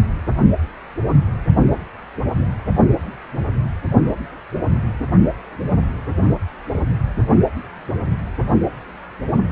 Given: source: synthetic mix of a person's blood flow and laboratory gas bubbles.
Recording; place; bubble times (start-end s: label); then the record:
Doppler ultrasound of blood flow; precordium
1.11-1.16 s: bubbles
6.71-6.83 s: bubbles
From the record:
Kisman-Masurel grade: 121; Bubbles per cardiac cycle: 1 to 2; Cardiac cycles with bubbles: 10 to 50%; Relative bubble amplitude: barely perceptible (0.100 to 0.250); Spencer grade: 2 (many but less than half of the cardiac periods contain bubble signals, singularly or in groups); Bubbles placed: only in the low amplitude regions of the cardiac cycle